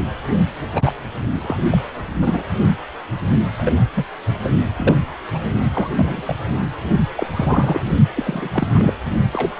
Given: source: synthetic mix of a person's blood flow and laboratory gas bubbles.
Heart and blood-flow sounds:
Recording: Doppler ultrasound of blood flow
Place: precordium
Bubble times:
0.39-0.45 s: bubbles
0.74-0.92 s: bubbles
1.41-1.62 s: bubbles
1.71-1.82 s: bubbles
2.21-2.43 s: bubbles
3.51-3.73 s: bubbles
3.94-4.05 s: bubbles
4.42-4.50 s: bubbles
4.77-4.98 s: bubbles
5.07-5.11 s: bubbles
5.32-5.42 s: bubbles
5.74-6.22 s: bubbles
6.26-6.36 s: bubbles
6.61-6.69 s: bubbles
7.16-7.27 s: bubbles
7.32-7.85 s: bubbles
8.14-8.48 s: bubbles
8.52-8.71 s: bubbles
8.74-8.93 s: bubbles
9.33-9.52 s: bubbles
From the record:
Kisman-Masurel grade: 242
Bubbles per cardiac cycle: several, 3 to 8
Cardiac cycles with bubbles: 100%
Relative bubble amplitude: moderate (0.250 to 0.450)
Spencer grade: 3 (all of the cardiac periods contain showers or single bubble signals, but not dominating or overriding the cardiac motion signals)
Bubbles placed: only in the low amplitude regions of the cardiac cycle

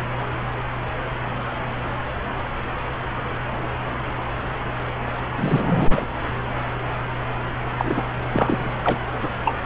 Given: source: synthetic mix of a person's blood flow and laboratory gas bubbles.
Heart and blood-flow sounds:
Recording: Doppler ultrasound of blood flow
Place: subclavian vein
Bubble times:
5.37-6.05 s: bubbles
7.79-8.02 s: bubbles
8.32-8.74 s: bubbles
8.83-8.99 s: bubbles
9.22-9.29 s: bubbles
9.45-9.56 s: bubbles
9.61-9.66 s: bubbles
From the record:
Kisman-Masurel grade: 222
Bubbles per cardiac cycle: several, 3 to 8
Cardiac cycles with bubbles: 10 to 50%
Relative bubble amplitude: moderate (0.250 to 0.450)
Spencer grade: 2 (many but less than half of the cardiac periods contain bubble signals, singularly or in groups)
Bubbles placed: anywhere in the cardiac cycle

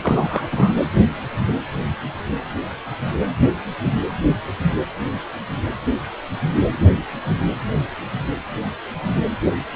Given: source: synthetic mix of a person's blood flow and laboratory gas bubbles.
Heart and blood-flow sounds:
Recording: Doppler ultrasound of blood flow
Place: precordium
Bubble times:
0.01-0.47 s: bubbles
0.51-0.73 s: bubbles
From the record:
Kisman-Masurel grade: 212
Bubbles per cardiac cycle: several, 3 to 8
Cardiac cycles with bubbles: 1 to 10%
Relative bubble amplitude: moderate (0.250 to 0.450)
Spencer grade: 1 (occasional bubble signal discernible with the cardiac motion signal, with majority of cardiac periods free of bubbles)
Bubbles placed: anywhere in the cardiac cycle

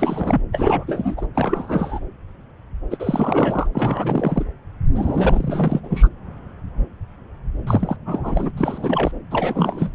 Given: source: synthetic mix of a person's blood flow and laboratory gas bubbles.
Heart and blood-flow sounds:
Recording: Doppler ultrasound of blood flow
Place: subclavian vein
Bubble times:
0.00-0.42 s: bubbles
0.52-0.84 s: bubbles
0.87-1.26 s: bubbles
1.34-2.00 s: bubbles
2.90-3.67 s: bubbles
3.73-4.45 s: bubbles
4.95-5.80 s: bubbles
5.83-6.09 s: bubbles
7.67-7.97 s: bubbles
8.05-8.51 s: bubbles
8.57-9.12 s: bubbles
9.30-9.93 s: bubbles
From the record:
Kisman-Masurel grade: 332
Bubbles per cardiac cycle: rolling drumbeat, 9 or more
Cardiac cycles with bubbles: 50 to 99%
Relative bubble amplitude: moderate (0.250 to 0.450)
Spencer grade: 3 (all of the cardiac periods contain showers or single bubble signals, but not dominating or overriding the cardiac motion signals)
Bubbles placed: anywhere in the cardiac cycle

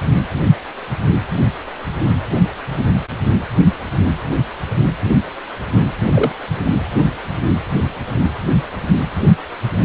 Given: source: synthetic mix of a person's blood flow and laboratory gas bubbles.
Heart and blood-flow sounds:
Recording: Doppler ultrasound of blood flow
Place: precordium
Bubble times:
6.13-6.32 s: bubbles
From the record:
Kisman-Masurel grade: 112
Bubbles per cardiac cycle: 1 to 2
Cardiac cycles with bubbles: 1 to 10%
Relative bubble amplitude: moderate (0.250 to 0.450)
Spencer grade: 1 (occasional bubble signal discernible with the cardiac motion signal, with majority of cardiac periods free of bubbles)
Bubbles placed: anywhere in the cardiac cycle

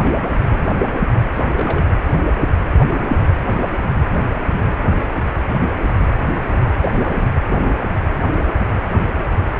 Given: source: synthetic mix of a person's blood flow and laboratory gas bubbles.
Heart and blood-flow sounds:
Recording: Doppler ultrasound of blood flow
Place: precordium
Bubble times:
0.00-0.15 s: bubbles
0.46-0.63 s: bubbles
1.35-1.85 s: bubbles
1.92-1.96 s: bubbles
6.81-6.90 s: bubbles
7.00-7.25 s: bubbles
9.57-9.60 s: bubbles
From the record:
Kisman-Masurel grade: 221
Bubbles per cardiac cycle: several, 3 to 8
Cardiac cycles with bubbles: 10 to 50%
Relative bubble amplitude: barely perceptible (0.100 to 0.250)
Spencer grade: 2 (many but less than half of the cardiac periods contain bubble signals, singularly or in groups)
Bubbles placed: anywhere in the cardiac cycle

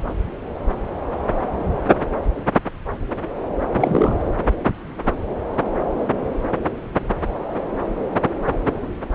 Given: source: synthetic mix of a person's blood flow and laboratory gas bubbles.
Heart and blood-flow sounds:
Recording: Doppler ultrasound of blood flow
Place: subclavian vein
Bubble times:
3.74-4.15 s: bubbles
From the record:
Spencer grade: 1 (occasional bubble signal discernible with the cardiac motion signal, with majority of cardiac periods free of bubbles)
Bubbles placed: anywhere in the cardiac cycle

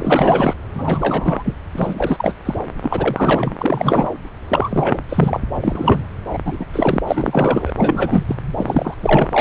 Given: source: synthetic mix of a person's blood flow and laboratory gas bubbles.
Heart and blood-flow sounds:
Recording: Doppler ultrasound of blood flow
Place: subclavian vein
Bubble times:
0.00-0.55 s: bubbles
0.74-1.54 s: bubbles
1.73-2.35 s: bubbles
2.45-2.54 s: bubbles
2.83-3.56 s: bubbles
3.59-4.10 s: bubbles
4.49-4.98 s: bubbles
5.09-5.39 s: bubbles
5.62-6.03 s: bubbles
6.33-6.38 s: bubbles
6.44-6.65 s: bubbles
6.72-7.01 s: bubbles
7.07-7.71 s: bubbles
7.77-8.24 s: bubbles
8.28-8.36 s: bubbles
8.57-8.95 s: bubbles
9.00-9.41 s: bubbles
From the record:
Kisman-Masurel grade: 343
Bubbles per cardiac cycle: rolling drumbeat, 9 or more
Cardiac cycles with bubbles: 100%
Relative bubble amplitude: loud (0.450 to 0.775)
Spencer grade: 3 (all of the cardiac periods contain showers or single bubble signals, but not dominating or overriding the cardiac motion signals)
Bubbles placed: anywhere in the cardiac cycle

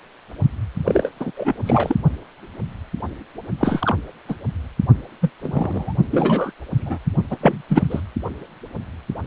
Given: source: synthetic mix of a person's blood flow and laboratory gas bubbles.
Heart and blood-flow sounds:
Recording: Doppler ultrasound of blood flow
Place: precordium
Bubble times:
0.84-1.10 s: bubbles
1.20-1.31 s: bubbles
1.36-1.53 s: bubbles
1.66-1.95 s: bubbles
3.58-3.96 s: bubbles
4.29-4.35 s: bubbles
5.21-5.30 s: bubbles
5.42-5.93 s: bubbles
6.11-6.52 s: bubbles
6.70-6.98 s: bubbles
7.30-7.37 s: bubbles
7.40-7.62 s: bubbles
7.69-7.87 s: bubbles
7.89-8.01 s: bubbles
From the record:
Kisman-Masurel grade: 233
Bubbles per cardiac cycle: several, 3 to 8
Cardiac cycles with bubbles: 50 to 99%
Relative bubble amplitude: loud (0.450 to 0.775)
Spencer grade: 3 (all of the cardiac periods contain showers or single bubble signals, but not dominating or overriding the cardiac motion signals)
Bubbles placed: only in the low amplitude regions of the cardiac cycle

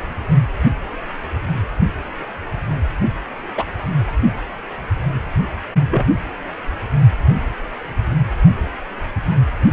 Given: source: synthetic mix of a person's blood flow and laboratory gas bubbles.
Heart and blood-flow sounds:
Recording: Doppler ultrasound of blood flow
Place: precordium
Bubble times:
3.57-3.65 s: bubbles
5.90-6.06 s: bubbles
From the record:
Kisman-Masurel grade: 123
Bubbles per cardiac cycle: 1 to 2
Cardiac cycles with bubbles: 10 to 50%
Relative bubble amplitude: loud (0.450 to 0.775)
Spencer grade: 2 (many but less than half of the cardiac periods contain bubble signals, singularly or in groups)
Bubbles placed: only in the low amplitude regions of the cardiac cycle

